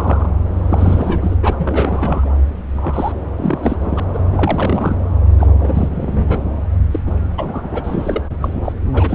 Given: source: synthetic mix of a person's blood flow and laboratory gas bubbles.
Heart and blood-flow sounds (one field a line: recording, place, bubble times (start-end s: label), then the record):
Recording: Doppler ultrasound of blood flow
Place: subclavian vein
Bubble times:
0.00-0.30 s: bubbles
0.53-1.36 s: bubbles
1.42-2.30 s: bubbles
2.74-3.13 s: bubbles
3.36-3.77 s: bubbles
3.83-4.00 s: bubbles
4.13-4.19 s: bubbles
4.32-4.98 s: bubbles
5.39-6.42 s: bubbles
6.91-7.00 s: bubbles
7.06-7.15 s: bubbles
7.38-7.69 s: bubbles
7.71-8.22 s: bubbles
8.41-8.54 s: bubbles
8.64-8.72 s: bubbles
8.92-9.15 s: bubbles
From the record:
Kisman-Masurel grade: 342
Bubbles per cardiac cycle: rolling drumbeat, 9 or more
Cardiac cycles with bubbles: 100%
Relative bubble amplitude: moderate (0.250 to 0.450)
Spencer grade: 3 (all of the cardiac periods contain showers or single bubble signals, but not dominating or overriding the cardiac motion signals)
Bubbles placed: anywhere in the cardiac cycle